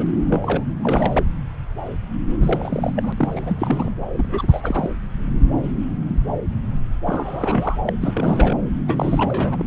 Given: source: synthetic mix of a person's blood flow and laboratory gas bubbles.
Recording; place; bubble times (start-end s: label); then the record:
Doppler ultrasound of blood flow; subclavian vein
0.00-0.05 s: bubbles
0.27-0.64 s: bubbles
0.81-1.34 s: bubbles
2.29-2.93 s: bubbles
2.95-3.13 s: bubbles
3.17-3.90 s: bubbles
4.13-4.90 s: bubbles
7.06-7.77 s: bubbles
7.84-7.93 s: bubbles
8.01-8.54 s: bubbles
8.88-9.66 s: bubbles
From the record:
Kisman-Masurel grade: 332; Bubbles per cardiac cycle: rolling drumbeat, 9 or more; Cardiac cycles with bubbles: 50 to 99%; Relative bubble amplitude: moderate (0.250 to 0.450); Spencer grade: 3 (all of the cardiac periods contain showers or single bubble signals, but not dominating or overriding the cardiac motion signals); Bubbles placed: anywhere in the cardiac cycle